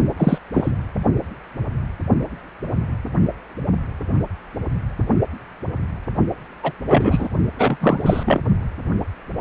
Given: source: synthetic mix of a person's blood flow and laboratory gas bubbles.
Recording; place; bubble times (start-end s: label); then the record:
Doppler ultrasound of blood flow; precordium
0.17-0.39 s: bubbles
0.52-0.72 s: bubbles
6.63-6.72 s: bubbles
6.88-7.28 s: bubbles
7.57-7.77 s: bubbles
7.81-8.39 s: bubbles
From the record:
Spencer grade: 2 (many but less than half of the cardiac periods contain bubble signals, singularly or in groups); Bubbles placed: only in the low amplitude regions of the cardiac cycle